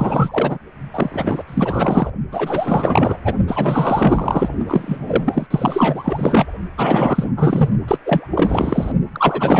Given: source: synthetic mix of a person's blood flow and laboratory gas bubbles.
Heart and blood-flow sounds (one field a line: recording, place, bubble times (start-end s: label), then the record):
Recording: Doppler ultrasound of blood flow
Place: precordium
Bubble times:
0.00-0.58 s: bubbles
0.93-1.44 s: bubbles
1.47-2.10 s: bubbles
2.31-3.18 s: bubbles
3.25-3.34 s: bubbles
3.47-4.49 s: bubbles
4.67-5.47 s: bubbles
5.50-6.47 s: bubbles
6.77-7.31 s: bubbles
7.37-7.70 s: bubbles
7.87-7.98 s: bubbles
8.04-8.28 s: bubbles
8.30-8.92 s: bubbles
9.14-9.60 s: bubbles
From the record:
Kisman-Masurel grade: 444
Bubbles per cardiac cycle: continuous sound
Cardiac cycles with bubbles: 100%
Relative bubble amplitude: maximal (0.775 to 0.999)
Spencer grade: 4 (maximum detectable bubble signal sounding continuously throughout systole and diastole of every cardiac period, and overriding the amplitude of the normal cardiac signals)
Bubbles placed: only in the low amplitude regions of the cardiac cycle